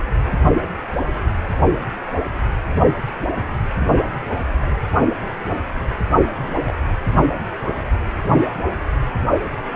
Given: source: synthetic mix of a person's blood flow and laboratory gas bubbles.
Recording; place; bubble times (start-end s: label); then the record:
Doppler ultrasound of blood flow; precordium
3.80-3.87 s: bubbles
6.25-6.51 s: bubbles
6.67-6.73 s: bubbles
From the record:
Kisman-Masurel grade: 121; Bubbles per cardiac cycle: 1 to 2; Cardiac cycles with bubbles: 10 to 50%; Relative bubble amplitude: barely perceptible (0.100 to 0.250); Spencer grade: 2 (many but less than half of the cardiac periods contain bubble signals, singularly or in groups); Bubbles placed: anywhere in the cardiac cycle